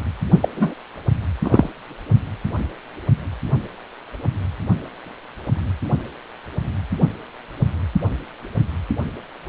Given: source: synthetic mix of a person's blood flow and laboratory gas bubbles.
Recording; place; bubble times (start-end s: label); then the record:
Doppler ultrasound of blood flow; precordium
0.40-0.48 s: bubbles
0.56-0.74 s: bubbles
1.42-1.69 s: bubbles
From the record:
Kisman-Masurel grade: 213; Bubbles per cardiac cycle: several, 3 to 8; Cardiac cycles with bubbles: 1 to 10%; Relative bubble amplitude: loud (0.450 to 0.775); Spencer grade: 1 (occasional bubble signal discernible with the cardiac motion signal, with majority of cardiac periods free of bubbles); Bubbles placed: only in the low amplitude regions of the cardiac cycle